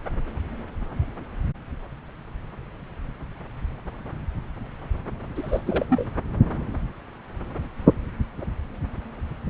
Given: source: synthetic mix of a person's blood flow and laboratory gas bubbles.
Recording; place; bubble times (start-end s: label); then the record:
Doppler ultrasound of blood flow; subclavian vein
5.35-5.62 s: bubbles
5.66-5.85 s: bubbles
5.89-6.04 s: bubbles
From the record:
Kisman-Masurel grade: 212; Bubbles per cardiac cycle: several, 3 to 8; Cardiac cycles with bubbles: 1 to 10%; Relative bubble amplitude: moderate (0.250 to 0.450); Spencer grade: 1 (occasional bubble signal discernible with the cardiac motion signal, with majority of cardiac periods free of bubbles); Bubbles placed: anywhere in the cardiac cycle